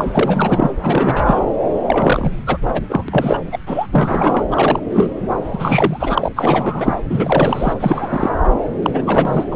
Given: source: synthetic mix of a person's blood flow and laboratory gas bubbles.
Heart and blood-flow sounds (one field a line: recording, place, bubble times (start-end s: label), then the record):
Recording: Doppler ultrasound of blood flow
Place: subclavian vein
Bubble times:
0.00-0.76 s: bubbles
0.82-1.40 s: bubbles
1.84-2.31 s: bubbles
2.47-2.58 s: bubbles
2.73-2.82 s: bubbles
2.89-3.04 s: bubbles
3.08-3.39 s: bubbles
3.52-3.58 s: bubbles
3.67-3.87 s: bubbles
3.92-4.44 s: bubbles
4.51-4.79 s: bubbles
4.90-5.13 s: bubbles
5.41-6.29 s: bubbles
6.36-6.95 s: bubbles
7.09-7.73 s: bubbles
7.80-8.30 s: bubbles
8.82-9.46 s: bubbles
9.51-9.56 s: bubbles
From the record:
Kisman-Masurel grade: 343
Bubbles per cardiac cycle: rolling drumbeat, 9 or more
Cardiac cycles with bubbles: 100%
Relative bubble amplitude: loud (0.450 to 0.775)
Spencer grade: 3 (all of the cardiac periods contain showers or single bubble signals, but not dominating or overriding the cardiac motion signals)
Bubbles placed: anywhere in the cardiac cycle